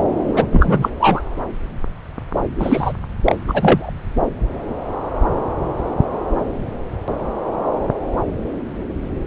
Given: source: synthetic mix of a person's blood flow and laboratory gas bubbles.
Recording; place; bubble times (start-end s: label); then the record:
Doppler ultrasound of blood flow; subclavian vein
0.27-0.89 s: bubbles
0.99-1.21 s: bubbles
2.59-2.92 s: bubbles
3.25-3.35 s: bubbles
3.48-3.90 s: bubbles
From the record:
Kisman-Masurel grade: 223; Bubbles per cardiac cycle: several, 3 to 8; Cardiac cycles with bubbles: 10 to 50%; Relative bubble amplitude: loud (0.450 to 0.775); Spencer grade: 2 (many but less than half of the cardiac periods contain bubble signals, singularly or in groups); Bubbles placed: anywhere in the cardiac cycle